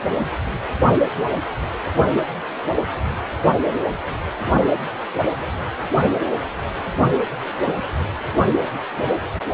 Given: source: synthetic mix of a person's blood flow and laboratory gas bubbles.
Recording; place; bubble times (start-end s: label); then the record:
Doppler ultrasound of blood flow; precordium
no bubbles
From the record:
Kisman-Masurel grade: 000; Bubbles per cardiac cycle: 0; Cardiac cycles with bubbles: 0%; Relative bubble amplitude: no bubbles discernible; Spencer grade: 0 (complete lack of bubble signals)